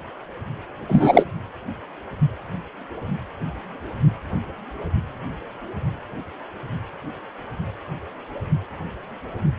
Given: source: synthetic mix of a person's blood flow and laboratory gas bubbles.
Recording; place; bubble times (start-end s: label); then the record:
Doppler ultrasound of blood flow; precordium
0.88-1.24 s: bubbles
From the record:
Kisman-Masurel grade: 213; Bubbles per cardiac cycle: several, 3 to 8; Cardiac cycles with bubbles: 1 to 10%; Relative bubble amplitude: loud (0.450 to 0.775); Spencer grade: 1 (occasional bubble signal discernible with the cardiac motion signal, with majority of cardiac periods free of bubbles); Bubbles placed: anywhere in the cardiac cycle